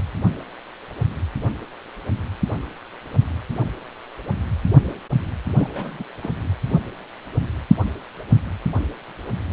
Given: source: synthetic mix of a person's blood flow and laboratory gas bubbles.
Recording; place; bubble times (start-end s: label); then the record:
Doppler ultrasound of blood flow; precordium
5.57-5.70 s: bubbles
5.74-6.04 s: bubbles
6.22-6.36 s: bubbles
From the record:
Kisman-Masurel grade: 221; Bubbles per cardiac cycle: several, 3 to 8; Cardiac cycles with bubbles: 10 to 50%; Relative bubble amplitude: barely perceptible (0.100 to 0.250); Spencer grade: 2 (many but less than half of the cardiac periods contain bubble signals, singularly or in groups); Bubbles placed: anywhere in the cardiac cycle